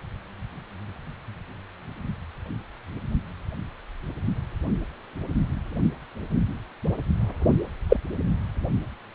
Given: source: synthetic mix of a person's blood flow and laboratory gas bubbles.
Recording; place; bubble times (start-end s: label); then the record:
Doppler ultrasound of blood flow; precordium
7.89-7.97 s: bubbles
From the record:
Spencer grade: 2 (many but less than half of the cardiac periods contain bubble signals, singularly or in groups); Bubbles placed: only in the low amplitude regions of the cardiac cycle